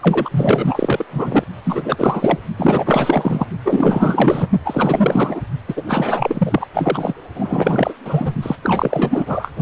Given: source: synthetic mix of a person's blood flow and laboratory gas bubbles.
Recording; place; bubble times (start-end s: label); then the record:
Doppler ultrasound of blood flow; precordium
0.00-1.04 s: bubbles
1.09-1.44 s: bubbles
1.64-2.38 s: bubbles
2.57-3.46 s: bubbles
3.65-4.49 s: bubbles
4.64-5.42 s: bubbles
5.68-5.82 s: bubbles
5.87-6.67 s: bubbles
6.74-7.14 s: bubbles
7.34-7.94 s: bubbles
8.04-8.33 s: bubbles
8.42-8.55 s: bubbles
8.62-9.53 s: bubbles
From the record:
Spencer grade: 4 (maximum detectable bubble signal sounding continuously throughout systole and diastole of every cardiac period, and overriding the amplitude of the normal cardiac signals); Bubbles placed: only in the low amplitude regions of the cardiac cycle